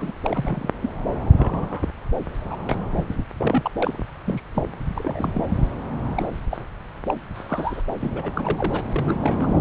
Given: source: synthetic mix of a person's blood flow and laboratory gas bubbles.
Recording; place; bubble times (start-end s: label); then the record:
Doppler ultrasound of blood flow; subclavian vein
0.00-0.12 s: bubbles
0.22-0.70 s: bubbles
0.80-0.90 s: bubbles
1.33-1.89 s: bubbles
2.46-2.62 s: bubbles
2.69-2.83 s: bubbles
2.96-3.04 s: bubbles
3.08-3.23 s: bubbles
3.38-3.71 s: bubbles
3.79-4.01 s: bubbles
4.26-4.42 s: bubbles
4.54-4.63 s: bubbles
4.95-5.45 s: bubbles
6.09-6.28 s: bubbles
6.50-6.57 s: bubbles
7.07-7.14 s: bubbles
7.34-7.83 s: bubbles
8.00-8.84 s: bubbles
8.92-9.54 s: bubbles
From the record:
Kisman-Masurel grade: 242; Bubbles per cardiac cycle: several, 3 to 8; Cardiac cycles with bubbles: 100%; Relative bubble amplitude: moderate (0.250 to 0.450); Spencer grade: 3 (all of the cardiac periods contain showers or single bubble signals, but not dominating or overriding the cardiac motion signals); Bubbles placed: anywhere in the cardiac cycle